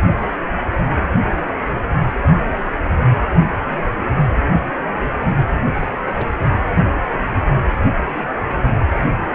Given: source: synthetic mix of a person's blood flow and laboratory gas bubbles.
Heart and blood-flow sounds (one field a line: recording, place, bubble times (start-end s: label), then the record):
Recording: Doppler ultrasound of blood flow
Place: precordium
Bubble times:
5.80-5.88 s: bubbles
6.05-6.34 s: bubbles
From the record:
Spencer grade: 1 (occasional bubble signal discernible with the cardiac motion signal, with majority of cardiac periods free of bubbles)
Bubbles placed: anywhere in the cardiac cycle